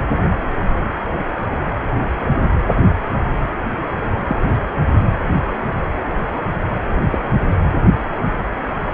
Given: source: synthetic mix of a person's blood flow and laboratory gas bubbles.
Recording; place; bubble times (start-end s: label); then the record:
Doppler ultrasound of blood flow; precordium
4.26-4.55 s: bubbles
7.11-7.18 s: bubbles
From the record:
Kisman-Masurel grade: 122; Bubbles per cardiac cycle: 1 to 2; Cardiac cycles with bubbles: 10 to 50%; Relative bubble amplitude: moderate (0.250 to 0.450); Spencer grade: 2 (many but less than half of the cardiac periods contain bubble signals, singularly or in groups); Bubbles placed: anywhere in the cardiac cycle